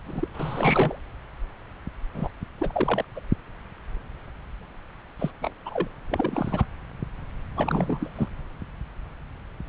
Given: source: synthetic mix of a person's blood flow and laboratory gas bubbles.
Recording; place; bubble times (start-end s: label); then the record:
Doppler ultrasound of blood flow; subclavian vein
0.05-0.28 s: bubbles
0.33-0.98 s: bubbles
2.14-2.29 s: bubbles
2.58-3.05 s: bubbles
3.14-3.20 s: bubbles
5.19-5.31 s: bubbles
5.42-5.52 s: bubbles
5.66-5.88 s: bubbles
6.11-6.65 s: bubbles
7.56-8.09 s: bubbles
8.15-8.29 s: bubbles
From the record:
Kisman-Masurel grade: 332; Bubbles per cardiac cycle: rolling drumbeat, 9 or more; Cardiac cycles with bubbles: 50 to 99%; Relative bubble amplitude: moderate (0.250 to 0.450); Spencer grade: 3 (all of the cardiac periods contain showers or single bubble signals, but not dominating or overriding the cardiac motion signals); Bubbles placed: anywhere in the cardiac cycle